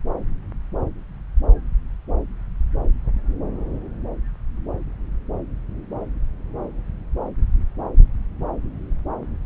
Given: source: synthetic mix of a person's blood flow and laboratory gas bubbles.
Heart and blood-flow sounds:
Doppler ultrasound of blood flow; subclavian vein
no bubbles
From the record:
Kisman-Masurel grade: 000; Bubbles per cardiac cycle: 0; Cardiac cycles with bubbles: 0%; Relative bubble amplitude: no bubbles discernible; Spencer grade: 0 (complete lack of bubble signals)

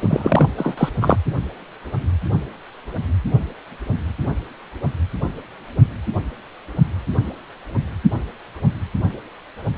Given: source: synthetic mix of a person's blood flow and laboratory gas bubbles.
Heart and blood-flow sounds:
Doppler ultrasound of blood flow; precordium
0.00-0.49 s: bubbles
0.57-0.90 s: bubbles
1.01-1.18 s: bubbles
From the record:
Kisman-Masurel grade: 213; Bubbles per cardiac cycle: several, 3 to 8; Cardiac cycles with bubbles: 1 to 10%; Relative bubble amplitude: loud (0.450 to 0.775); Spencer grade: 1 (occasional bubble signal discernible with the cardiac motion signal, with majority of cardiac periods free of bubbles); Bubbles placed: only in the low amplitude regions of the cardiac cycle

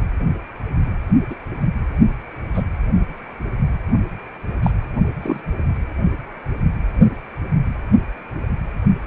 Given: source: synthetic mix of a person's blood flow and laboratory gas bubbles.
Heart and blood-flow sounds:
Doppler ultrasound of blood flow; precordium
1.30-1.35 s: bubbles
2.53-2.62 s: bubbles
4.62-4.71 s: bubbles
5.23-5.40 s: bubbles
From the record:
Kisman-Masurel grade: 122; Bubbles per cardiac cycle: 1 to 2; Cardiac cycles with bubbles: 10 to 50%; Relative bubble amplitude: moderate (0.250 to 0.450); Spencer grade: 2 (many but less than half of the cardiac periods contain bubble signals, singularly or in groups); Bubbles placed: only in the low amplitude regions of the cardiac cycle

